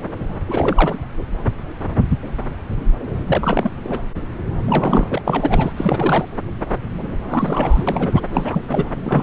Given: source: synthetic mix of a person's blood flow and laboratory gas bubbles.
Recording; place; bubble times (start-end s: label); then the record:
Doppler ultrasound of blood flow; subclavian vein
0.48-0.96 s: bubbles
3.27-3.71 s: bubbles
3.83-4.02 s: bubbles
4.67-5.22 s: bubbles
5.26-5.72 s: bubbles
5.76-6.25 s: bubbles
7.28-7.83 s: bubbles
7.87-8.21 s: bubbles
8.33-8.61 s: bubbles
8.68-8.85 s: bubbles
9.03-9.23 s: bubbles
From the record:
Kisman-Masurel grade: 332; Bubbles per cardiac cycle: rolling drumbeat, 9 or more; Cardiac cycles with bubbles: 50 to 99%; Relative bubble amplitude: moderate (0.250 to 0.450); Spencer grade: 3 (all of the cardiac periods contain showers or single bubble signals, but not dominating or overriding the cardiac motion signals); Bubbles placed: anywhere in the cardiac cycle